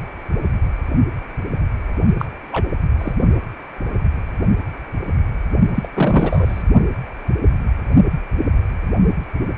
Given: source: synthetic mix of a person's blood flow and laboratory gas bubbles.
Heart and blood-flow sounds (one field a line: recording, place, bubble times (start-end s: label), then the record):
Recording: Doppler ultrasound of blood flow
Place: precordium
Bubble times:
2.18-2.26 s: bubbles
2.52-2.65 s: bubbles
2.99-3.14 s: bubbles
5.75-5.88 s: bubbles
5.93-6.63 s: bubbles
From the record:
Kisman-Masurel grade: 223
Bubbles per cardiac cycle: several, 3 to 8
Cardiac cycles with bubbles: 10 to 50%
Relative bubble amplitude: loud (0.450 to 0.775)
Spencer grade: 2 (many but less than half of the cardiac periods contain bubble signals, singularly or in groups)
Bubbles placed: only in the low amplitude regions of the cardiac cycle